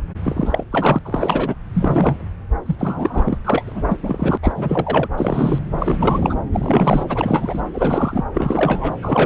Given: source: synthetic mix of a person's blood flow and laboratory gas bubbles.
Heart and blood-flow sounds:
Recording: Doppler ultrasound of blood flow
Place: subclavian vein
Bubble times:
0.23-0.64 s: bubbles
0.70-0.99 s: bubbles
1.05-1.55 s: bubbles
1.74-2.27 s: bubbles
2.66-2.75 s: bubbles
2.79-3.38 s: bubbles
3.45-3.64 s: bubbles
3.67-3.83 s: bubbles
3.89-3.97 s: bubbles
4.03-4.38 s: bubbles
4.42-5.08 s: bubbles
5.17-5.60 s: bubbles
5.79-6.35 s: bubbles
6.53-7.05 s: bubbles
7.08-7.62 s: bubbles
7.73-8.24 s: bubbles
8.34-8.99 s: bubbles
9.02-9.26 s: bubbles
From the record:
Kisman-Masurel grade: 343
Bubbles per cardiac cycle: rolling drumbeat, 9 or more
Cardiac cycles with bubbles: 100%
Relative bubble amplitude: loud (0.450 to 0.775)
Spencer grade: 3 (all of the cardiac periods contain showers or single bubble signals, but not dominating or overriding the cardiac motion signals)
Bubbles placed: anywhere in the cardiac cycle

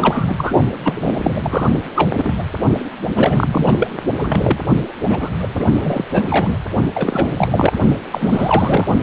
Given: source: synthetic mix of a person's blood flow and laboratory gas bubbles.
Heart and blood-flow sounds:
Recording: Doppler ultrasound of blood flow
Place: precordium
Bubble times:
0.00-0.53 s: bubbles
0.84-1.67 s: bubbles
1.96-2.10 s: bubbles
2.17-2.33 s: bubbles
2.38-2.44 s: bubbles
3.15-3.90 s: bubbles
4.18-4.58 s: bubbles
5.08-5.18 s: bubbles
5.21-5.29 s: bubbles
5.38-5.49 s: bubbles
5.54-5.66 s: bubbles
5.79-6.04 s: bubbles
6.12-6.57 s: bubbles
6.93-7.47 s: bubbles
7.50-7.73 s: bubbles
8.10-8.85 s: bubbles
From the record:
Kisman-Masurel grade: 343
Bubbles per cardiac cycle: rolling drumbeat, 9 or more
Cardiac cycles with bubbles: 100%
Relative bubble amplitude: loud (0.450 to 0.775)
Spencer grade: 3 (all of the cardiac periods contain showers or single bubble signals, but not dominating or overriding the cardiac motion signals)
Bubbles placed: only in the low amplitude regions of the cardiac cycle

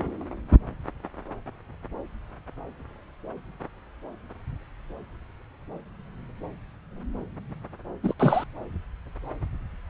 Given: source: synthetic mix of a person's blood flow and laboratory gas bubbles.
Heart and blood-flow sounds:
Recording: Doppler ultrasound of blood flow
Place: subclavian vein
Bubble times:
8.03-8.14 s: bubbles
8.18-8.44 s: bubbles
From the record:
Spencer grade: 1 (occasional bubble signal discernible with the cardiac motion signal, with majority of cardiac periods free of bubbles)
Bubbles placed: anywhere in the cardiac cycle

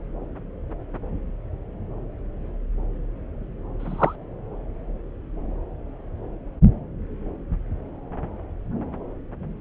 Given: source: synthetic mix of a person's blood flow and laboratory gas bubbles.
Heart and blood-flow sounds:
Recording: Doppler ultrasound of blood flow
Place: subclavian vein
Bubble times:
3.79-4.15 s: bubbles
From the record:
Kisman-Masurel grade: 123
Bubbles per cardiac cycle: 1 to 2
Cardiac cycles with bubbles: 10 to 50%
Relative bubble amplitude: loud (0.450 to 0.775)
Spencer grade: 2 (many but less than half of the cardiac periods contain bubble signals, singularly or in groups)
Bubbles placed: anywhere in the cardiac cycle

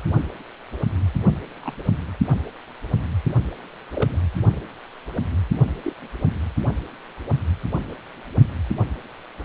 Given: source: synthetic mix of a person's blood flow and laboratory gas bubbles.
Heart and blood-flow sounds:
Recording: Doppler ultrasound of blood flow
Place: precordium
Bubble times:
1.60-1.73 s: bubbles
3.92-4.17 s: bubbles
5.84-5.93 s: bubbles
From the record:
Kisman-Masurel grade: 121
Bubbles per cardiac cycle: 1 to 2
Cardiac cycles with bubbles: 10 to 50%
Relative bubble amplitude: barely perceptible (0.100 to 0.250)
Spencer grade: 2 (many but less than half of the cardiac periods contain bubble signals, singularly or in groups)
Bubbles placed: only in the low amplitude regions of the cardiac cycle

